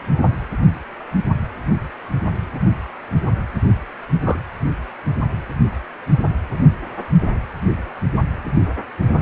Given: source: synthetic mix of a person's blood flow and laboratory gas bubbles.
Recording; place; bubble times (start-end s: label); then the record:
Doppler ultrasound of blood flow; precordium
4.21-4.40 s: bubbles
From the record:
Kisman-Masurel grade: 112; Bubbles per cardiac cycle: 1 to 2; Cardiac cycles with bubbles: 1 to 10%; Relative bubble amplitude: moderate (0.250 to 0.450); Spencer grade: 1 (occasional bubble signal discernible with the cardiac motion signal, with majority of cardiac periods free of bubbles); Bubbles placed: anywhere in the cardiac cycle